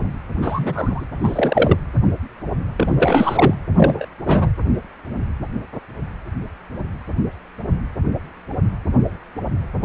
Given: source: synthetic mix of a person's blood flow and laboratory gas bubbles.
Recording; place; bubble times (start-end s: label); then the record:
Doppler ultrasound of blood flow; precordium
0.41-1.06 s: bubbles
1.23-1.77 s: bubbles
2.76-3.55 s: bubbles
3.76-4.06 s: bubbles
4.25-4.50 s: bubbles
From the record:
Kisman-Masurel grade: 223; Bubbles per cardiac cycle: several, 3 to 8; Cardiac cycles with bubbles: 10 to 50%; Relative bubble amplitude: loud (0.450 to 0.775); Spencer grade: 2 (many but less than half of the cardiac periods contain bubble signals, singularly or in groups); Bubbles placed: anywhere in the cardiac cycle